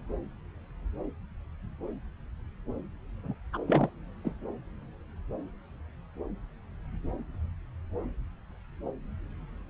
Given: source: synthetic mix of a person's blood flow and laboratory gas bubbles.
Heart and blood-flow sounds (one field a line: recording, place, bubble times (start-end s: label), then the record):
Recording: Doppler ultrasound of blood flow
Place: subclavian vein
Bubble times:
3.23-3.33 s: bubbles
3.52-3.58 s: bubbles
3.67-3.90 s: bubbles
4.25-4.33 s: bubbles
From the record:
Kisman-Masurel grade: 211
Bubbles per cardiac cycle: several, 3 to 8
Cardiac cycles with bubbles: 1 to 10%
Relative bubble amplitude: barely perceptible (0.100 to 0.250)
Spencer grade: 1 (occasional bubble signal discernible with the cardiac motion signal, with majority of cardiac periods free of bubbles)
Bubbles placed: anywhere in the cardiac cycle